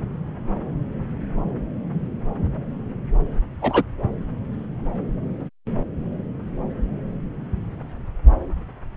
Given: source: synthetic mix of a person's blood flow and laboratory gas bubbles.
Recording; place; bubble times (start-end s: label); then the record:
Doppler ultrasound of blood flow; subclavian vein
3.62-3.83 s: bubbles
From the record:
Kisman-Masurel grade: 113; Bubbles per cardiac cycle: 1 to 2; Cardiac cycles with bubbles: 1 to 10%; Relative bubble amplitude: loud (0.450 to 0.775); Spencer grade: 1 (occasional bubble signal discernible with the cardiac motion signal, with majority of cardiac periods free of bubbles); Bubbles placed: anywhere in the cardiac cycle